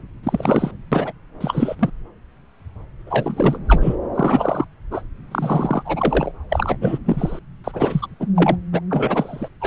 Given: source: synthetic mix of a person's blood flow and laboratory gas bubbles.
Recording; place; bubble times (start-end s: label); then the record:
Doppler ultrasound of blood flow; subclavian vein
0.23-0.71 s: bubbles
0.92-1.13 s: bubbles
1.41-1.75 s: bubbles
1.79-1.90 s: bubbles
3.06-3.58 s: bubbles
3.67-3.96 s: bubbles
4.14-4.65 s: bubbles
4.90-5.02 s: bubbles
5.31-6.31 s: bubbles
6.50-6.77 s: bubbles
6.81-6.98 s: bubbles
7.05-7.39 s: bubbles
7.64-8.07 s: bubbles
8.20-8.27 s: bubbles
8.35-8.57 s: bubbles
8.72-8.81 s: bubbles
8.90-9.49 s: bubbles
9.61-9.67 s: bubbles
From the record:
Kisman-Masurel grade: 333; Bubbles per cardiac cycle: rolling drumbeat, 9 or more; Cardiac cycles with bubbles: 50 to 99%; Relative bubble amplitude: loud (0.450 to 0.775); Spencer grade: 3 (all of the cardiac periods contain showers or single bubble signals, but not dominating or overriding the cardiac motion signals); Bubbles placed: anywhere in the cardiac cycle